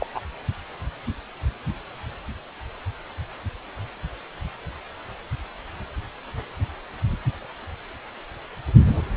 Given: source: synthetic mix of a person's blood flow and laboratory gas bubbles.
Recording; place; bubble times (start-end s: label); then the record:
Doppler ultrasound of blood flow; precordium
0.00-0.06 s: bubbles
0.14-0.20 s: bubbles
From the record:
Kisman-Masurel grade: 212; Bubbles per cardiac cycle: several, 3 to 8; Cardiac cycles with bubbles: 1 to 10%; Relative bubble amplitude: moderate (0.250 to 0.450); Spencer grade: 1 (occasional bubble signal discernible with the cardiac motion signal, with majority of cardiac periods free of bubbles); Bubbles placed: only in the low amplitude regions of the cardiac cycle